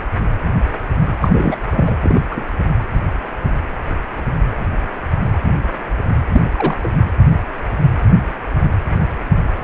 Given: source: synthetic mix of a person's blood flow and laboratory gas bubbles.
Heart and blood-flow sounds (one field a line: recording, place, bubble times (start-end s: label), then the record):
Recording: Doppler ultrasound of blood flow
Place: precordium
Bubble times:
1.21-1.56 s: bubbles
1.74-1.96 s: bubbles
2.01-2.19 s: bubbles
2.31-2.44 s: bubbles
6.31-6.42 s: bubbles
6.52-6.77 s: bubbles
6.83-6.89 s: bubbles
From the record:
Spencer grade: 2 (many but less than half of the cardiac periods contain bubble signals, singularly or in groups)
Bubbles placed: anywhere in the cardiac cycle